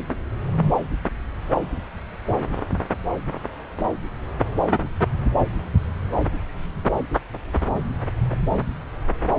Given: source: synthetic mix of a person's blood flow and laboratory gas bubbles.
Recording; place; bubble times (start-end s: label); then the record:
Doppler ultrasound of blood flow; subclavian vein
4.69-4.90 s: bubbles
8.31-8.37 s: bubbles
9.30-9.36 s: bubbles
From the record:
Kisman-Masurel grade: 121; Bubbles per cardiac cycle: 1 to 2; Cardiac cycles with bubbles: 10 to 50%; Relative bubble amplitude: barely perceptible (0.100 to 0.250); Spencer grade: 2 (many but less than half of the cardiac periods contain bubble signals, singularly or in groups); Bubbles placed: anywhere in the cardiac cycle